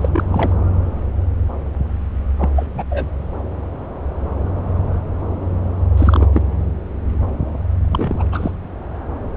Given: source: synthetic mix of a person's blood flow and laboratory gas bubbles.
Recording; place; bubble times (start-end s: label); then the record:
Doppler ultrasound of blood flow; subclavian vein
0.00-0.55 s: bubbles
2.38-2.49 s: bubbles
2.55-2.67 s: bubbles
2.74-2.83 s: bubbles
2.90-3.08 s: bubbles
5.97-6.27 s: bubbles
6.33-6.43 s: bubbles
7.82-8.24 s: bubbles
8.32-8.51 s: bubbles
From the record:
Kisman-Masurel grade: 222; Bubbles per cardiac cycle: several, 3 to 8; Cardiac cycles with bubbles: 10 to 50%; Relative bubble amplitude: moderate (0.250 to 0.450); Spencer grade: 2 (many but less than half of the cardiac periods contain bubble signals, singularly or in groups); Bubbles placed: anywhere in the cardiac cycle